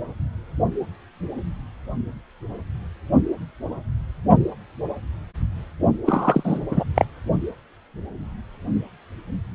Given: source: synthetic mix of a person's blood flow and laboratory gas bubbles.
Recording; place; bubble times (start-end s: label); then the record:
Doppler ultrasound of blood flow; precordium
6.05-6.59 s: bubbles
6.71-6.83 s: bubbles
6.95-7.05 s: bubbles
From the record:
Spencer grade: 1 (occasional bubble signal discernible with the cardiac motion signal, with majority of cardiac periods free of bubbles); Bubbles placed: only in the low amplitude regions of the cardiac cycle